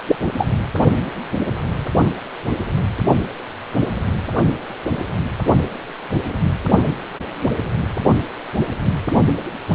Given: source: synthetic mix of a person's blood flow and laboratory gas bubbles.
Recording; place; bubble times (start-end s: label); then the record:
Doppler ultrasound of blood flow; precordium
0.07-0.15 s: bubbles
0.38-0.48 s: bubbles
From the record:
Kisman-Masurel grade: 113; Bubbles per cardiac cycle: 1 to 2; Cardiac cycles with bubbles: 1 to 10%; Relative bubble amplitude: loud (0.450 to 0.775); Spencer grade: 1 (occasional bubble signal discernible with the cardiac motion signal, with majority of cardiac periods free of bubbles); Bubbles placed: only in the low amplitude regions of the cardiac cycle